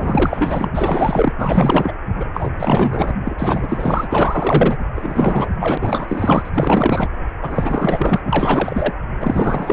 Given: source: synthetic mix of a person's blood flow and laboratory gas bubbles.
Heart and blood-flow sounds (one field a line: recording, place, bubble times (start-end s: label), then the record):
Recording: Doppler ultrasound of blood flow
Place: precordium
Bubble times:
0.00-0.69 s: bubbles
0.73-1.32 s: bubbles
1.38-1.92 s: bubbles
2.19-2.25 s: bubbles
2.33-2.50 s: bubbles
2.57-3.13 s: bubbles
3.25-3.35 s: bubbles
3.38-4.78 s: bubbles
4.95-5.47 s: bubbles
5.59-5.78 s: bubbles
5.80-6.50 s: bubbles
6.53-7.11 s: bubbles
7.42-8.21 s: bubbles
8.25-8.94 s: bubbles
9.20-9.73 s: bubbles
From the record:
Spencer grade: 4 (maximum detectable bubble signal sounding continuously throughout systole and diastole of every cardiac period, and overriding the amplitude of the normal cardiac signals)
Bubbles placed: anywhere in the cardiac cycle